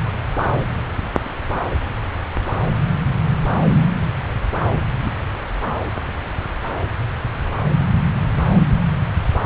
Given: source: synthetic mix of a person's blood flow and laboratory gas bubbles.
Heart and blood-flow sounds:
Doppler ultrasound of blood flow; subclavian vein
4.94-5.12 s: bubbles
From the record:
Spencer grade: 1 (occasional bubble signal discernible with the cardiac motion signal, with majority of cardiac periods free of bubbles); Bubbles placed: anywhere in the cardiac cycle

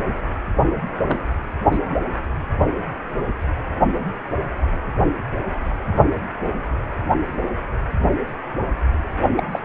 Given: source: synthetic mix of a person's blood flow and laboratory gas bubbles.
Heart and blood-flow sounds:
Doppler ultrasound of blood flow; precordium
1.06-1.27 s: bubbles
1.71-1.79 s: bubbles
9.37-9.44 s: bubbles
9.52-9.59 s: bubbles
From the record:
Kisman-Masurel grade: 122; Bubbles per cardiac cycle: 1 to 2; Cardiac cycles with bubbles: 10 to 50%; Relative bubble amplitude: moderate (0.250 to 0.450); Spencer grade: 2 (many but less than half of the cardiac periods contain bubble signals, singularly or in groups); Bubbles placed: anywhere in the cardiac cycle

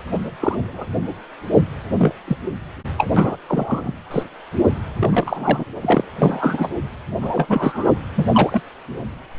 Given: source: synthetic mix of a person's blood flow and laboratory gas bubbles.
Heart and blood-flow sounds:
Doppler ultrasound of blood flow; precordium
0.40-0.87 s: bubbles
1.52-1.63 s: bubbles
1.98-2.13 s: bubbles
2.27-2.36 s: bubbles
2.98-3.12 s: bubbles
3.16-3.36 s: bubbles
3.48-3.92 s: bubbles
4.11-4.24 s: bubbles
4.99-5.64 s: bubbles
5.81-6.04 s: bubbles
6.19-6.69 s: bubbles
7.22-7.91 s: bubbles
8.15-8.26 s: bubbles
8.32-8.62 s: bubbles
From the record:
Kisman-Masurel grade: 243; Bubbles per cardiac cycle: several, 3 to 8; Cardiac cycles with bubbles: 100%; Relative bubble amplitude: loud (0.450 to 0.775); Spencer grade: 3 (all of the cardiac periods contain showers or single bubble signals, but not dominating or overriding the cardiac motion signals); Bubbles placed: anywhere in the cardiac cycle

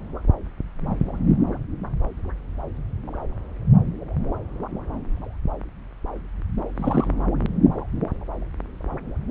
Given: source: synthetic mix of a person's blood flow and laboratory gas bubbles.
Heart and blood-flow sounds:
Doppler ultrasound of blood flow; subclavian vein
6.76-7.08 s: bubbles
From the record:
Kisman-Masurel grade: 112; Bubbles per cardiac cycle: 1 to 2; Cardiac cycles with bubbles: 1 to 10%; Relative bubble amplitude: moderate (0.250 to 0.450); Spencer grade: 1 (occasional bubble signal discernible with the cardiac motion signal, with majority of cardiac periods free of bubbles); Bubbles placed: anywhere in the cardiac cycle

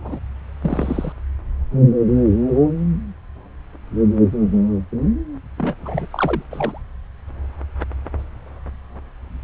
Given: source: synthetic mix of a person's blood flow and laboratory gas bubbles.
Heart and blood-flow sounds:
Doppler ultrasound of blood flow; subclavian vein
0.04-0.20 s: bubbles
0.63-1.12 s: bubbles
5.58-5.75 s: bubbles
5.83-6.07 s: bubbles
6.11-6.43 s: bubbles
6.50-6.82 s: bubbles
From the record:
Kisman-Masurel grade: 222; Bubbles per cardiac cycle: several, 3 to 8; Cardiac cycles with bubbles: 10 to 50%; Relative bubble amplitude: moderate (0.250 to 0.450); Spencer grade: 2 (many but less than half of the cardiac periods contain bubble signals, singularly or in groups); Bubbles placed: anywhere in the cardiac cycle

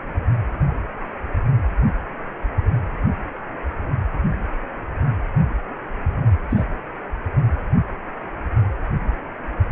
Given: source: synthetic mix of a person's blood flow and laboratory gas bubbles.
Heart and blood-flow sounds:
Doppler ultrasound of blood flow; precordium
6.50-6.65 s: bubbles
From the record:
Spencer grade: 1 (occasional bubble signal discernible with the cardiac motion signal, with majority of cardiac periods free of bubbles); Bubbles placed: anywhere in the cardiac cycle

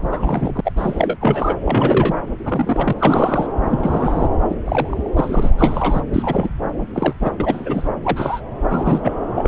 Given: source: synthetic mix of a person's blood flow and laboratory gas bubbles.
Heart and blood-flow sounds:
Doppler ultrasound of blood flow; subclavian vein
0.00-0.60 s: bubbles
0.65-0.72 s: bubbles
0.76-1.17 s: bubbles
1.21-1.56 s: bubbles
1.65-2.15 s: bubbles
2.44-2.93 s: bubbles
2.98-3.48 s: bubbles
3.65-4.29 s: bubbles
4.49-4.54 s: bubbles
4.66-5.09 s: bubbles
5.16-5.50 s: bubbles
5.57-6.01 s: bubbles
6.12-6.50 s: bubbles
6.93-7.13 s: bubbles
7.21-7.30 s: bubbles
7.40-7.89 s: bubbles
8.03-8.41 s: bubbles
8.69-9.14 s: bubbles
9.36-9.48 s: bubbles
From the record:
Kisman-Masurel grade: 243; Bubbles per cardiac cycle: several, 3 to 8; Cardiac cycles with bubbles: 100%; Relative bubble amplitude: loud (0.450 to 0.775); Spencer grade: 3 (all of the cardiac periods contain showers or single bubble signals, but not dominating or overriding the cardiac motion signals); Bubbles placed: anywhere in the cardiac cycle

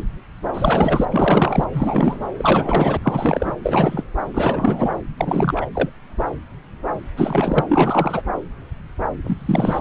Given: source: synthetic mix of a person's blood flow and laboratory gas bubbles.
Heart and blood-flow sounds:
Doppler ultrasound of blood flow; subclavian vein
0.54-1.05 s: bubbles
1.10-1.64 s: bubbles
1.72-2.24 s: bubbles
2.37-2.97 s: bubbles
3.04-3.54 s: bubbles
3.63-4.04 s: bubbles
4.34-4.94 s: bubbles
5.17-5.66 s: bubbles
5.74-5.90 s: bubbles
7.17-7.64 s: bubbles
7.69-8.22 s: bubbles
9.23-9.79 s: bubbles
From the record:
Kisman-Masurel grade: 332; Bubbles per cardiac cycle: rolling drumbeat, 9 or more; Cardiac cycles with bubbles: 50 to 99%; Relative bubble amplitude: moderate (0.250 to 0.450); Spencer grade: 3 (all of the cardiac periods contain showers or single bubble signals, but not dominating or overriding the cardiac motion signals); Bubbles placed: anywhere in the cardiac cycle

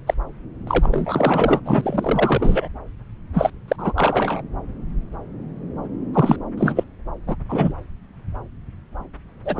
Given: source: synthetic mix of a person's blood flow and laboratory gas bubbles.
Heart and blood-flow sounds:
Doppler ultrasound of blood flow; subclavian vein
0.07-0.14 s: bubbles
0.67-1.60 s: bubbles
1.65-2.68 s: bubbles
3.33-3.50 s: bubbles
3.68-3.93 s: bubbles
3.96-4.42 s: bubbles
6.13-6.36 s: bubbles
6.58-6.83 s: bubbles
7.26-7.35 s: bubbles
7.49-7.73 s: bubbles
9.45-9.60 s: bubbles
From the record:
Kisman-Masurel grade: 333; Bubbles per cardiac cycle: rolling drumbeat, 9 or more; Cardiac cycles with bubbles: 50 to 99%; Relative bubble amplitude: loud (0.450 to 0.775); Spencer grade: 3 (all of the cardiac periods contain showers or single bubble signals, but not dominating or overriding the cardiac motion signals); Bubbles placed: anywhere in the cardiac cycle

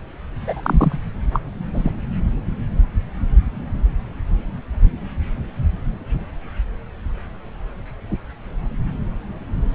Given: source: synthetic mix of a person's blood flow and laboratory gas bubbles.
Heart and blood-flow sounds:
Doppler ultrasound of blood flow; subclavian vein
0.40-0.98 s: bubbles
1.33-1.40 s: bubbles
1.74-1.91 s: bubbles
From the record:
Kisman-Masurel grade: 123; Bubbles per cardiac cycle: 1 to 2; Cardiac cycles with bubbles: 10 to 50%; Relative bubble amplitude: loud (0.450 to 0.775); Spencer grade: 2 (many but less than half of the cardiac periods contain bubble signals, singularly or in groups); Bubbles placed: anywhere in the cardiac cycle

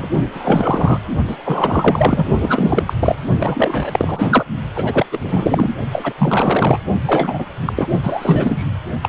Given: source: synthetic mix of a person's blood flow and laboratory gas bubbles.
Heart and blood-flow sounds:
Doppler ultrasound of blood flow; precordium
0.00-0.08 s: bubbles
0.32-1.00 s: bubbles
1.27-1.36 s: bubbles
1.44-2.28 s: bubbles
2.39-2.93 s: bubbles
3.00-3.16 s: bubbles
3.39-4.44 s: bubbles
4.75-5.05 s: bubbles
5.12-5.18 s: bubbles
5.23-5.75 s: bubbles
5.92-6.13 s: bubbles
6.17-6.78 s: bubbles
7.06-7.46 s: bubbles
7.65-7.73 s: bubbles
7.75-7.88 s: bubbles
8.03-8.71 s: bubbles
9.03-9.09 s: bubbles
From the record:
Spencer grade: 3 (all of the cardiac periods contain showers or single bubble signals, but not dominating or overriding the cardiac motion signals); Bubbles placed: only in the low amplitude regions of the cardiac cycle

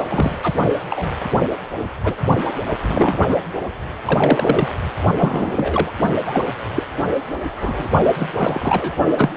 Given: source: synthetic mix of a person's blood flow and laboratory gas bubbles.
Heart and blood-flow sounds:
Doppler ultrasound of blood flow; precordium
0.00-0.38 s: bubbles
0.43-0.53 s: bubbles
0.90-1.09 s: bubbles
1.75-1.83 s: bubbles
2.04-2.16 s: bubbles
2.82-3.21 s: bubbles
3.29-3.37 s: bubbles
4.05-4.68 s: bubbles
5.17-5.92 s: bubbles
6.25-6.43 s: bubbles
6.75-6.83 s: bubbles
7.59-7.87 s: bubbles
8.17-8.29 s: bubbles
8.36-8.93 s: bubbles
9.17-9.29 s: bubbles
From the record:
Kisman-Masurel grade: 242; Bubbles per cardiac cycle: several, 3 to 8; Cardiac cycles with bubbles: 100%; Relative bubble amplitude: moderate (0.250 to 0.450); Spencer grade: 3 (all of the cardiac periods contain showers or single bubble signals, but not dominating or overriding the cardiac motion signals); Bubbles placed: only in the low amplitude regions of the cardiac cycle

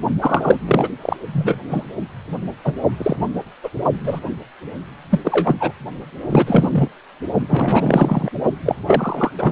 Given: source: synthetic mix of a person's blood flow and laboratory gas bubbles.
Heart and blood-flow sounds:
Doppler ultrasound of blood flow; precordium
0.21-0.58 s: bubbles
0.66-0.89 s: bubbles
1.01-1.17 s: bubbles
1.32-1.59 s: bubbles
1.69-1.85 s: bubbles
2.64-2.72 s: bubbles
2.97-3.17 s: bubbles
3.63-3.69 s: bubbles
4.04-4.20 s: bubbles
5.10-5.20 s: bubbles
5.24-5.56 s: bubbles
5.59-5.71 s: bubbles
6.27-6.88 s: bubbles
7.47-8.29 s: bubbles
8.65-8.75 s: bubbles
8.87-9.32 s: bubbles
9.38-9.52 s: bubbles
From the record:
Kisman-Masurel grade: 233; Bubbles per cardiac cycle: several, 3 to 8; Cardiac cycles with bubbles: 50 to 99%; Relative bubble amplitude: loud (0.450 to 0.775); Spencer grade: 3 (all of the cardiac periods contain showers or single bubble signals, but not dominating or overriding the cardiac motion signals); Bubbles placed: only in the low amplitude regions of the cardiac cycle

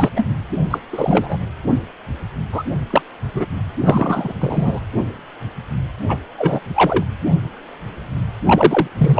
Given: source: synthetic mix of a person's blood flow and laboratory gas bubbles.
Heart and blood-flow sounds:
Doppler ultrasound of blood flow; precordium
0.00-0.12 s: bubbles
0.15-0.29 s: bubbles
0.70-0.78 s: bubbles
0.93-1.38 s: bubbles
2.51-2.62 s: bubbles
2.90-3.02 s: bubbles
3.33-3.45 s: bubbles
3.80-4.33 s: bubbles
4.40-4.80 s: bubbles
6.08-6.17 s: bubbles
6.38-6.70 s: bubbles
6.75-7.04 s: bubbles
8.46-8.88 s: bubbles
8.97-9.20 s: bubbles
From the record:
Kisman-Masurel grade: 233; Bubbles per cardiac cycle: several, 3 to 8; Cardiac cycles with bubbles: 50 to 99%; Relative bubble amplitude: loud (0.450 to 0.775); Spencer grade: 3 (all of the cardiac periods contain showers or single bubble signals, but not dominating or overriding the cardiac motion signals); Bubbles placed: anywhere in the cardiac cycle

